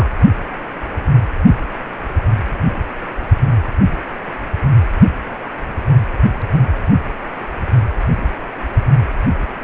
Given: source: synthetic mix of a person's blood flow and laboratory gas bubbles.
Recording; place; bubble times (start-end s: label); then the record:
Doppler ultrasound of blood flow; precordium
0.00-0.09 s: bubbles
From the record:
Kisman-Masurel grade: 212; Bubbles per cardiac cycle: several, 3 to 8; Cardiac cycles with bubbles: 1 to 10%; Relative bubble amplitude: moderate (0.250 to 0.450); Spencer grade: 1 (occasional bubble signal discernible with the cardiac motion signal, with majority of cardiac periods free of bubbles); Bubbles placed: only in the low amplitude regions of the cardiac cycle